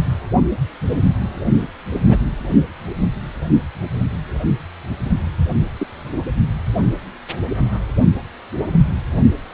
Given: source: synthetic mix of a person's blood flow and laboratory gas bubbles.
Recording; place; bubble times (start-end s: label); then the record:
Doppler ultrasound of blood flow; precordium
1.93-2.00 s: bubbles
2.08-2.17 s: bubbles
5.79-5.87 s: bubbles
6.04-6.17 s: bubbles
From the record:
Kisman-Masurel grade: 122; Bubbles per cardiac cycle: 1 to 2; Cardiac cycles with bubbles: 10 to 50%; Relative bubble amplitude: moderate (0.250 to 0.450); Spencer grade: 2 (many but less than half of the cardiac periods contain bubble signals, singularly or in groups); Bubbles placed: only in the low amplitude regions of the cardiac cycle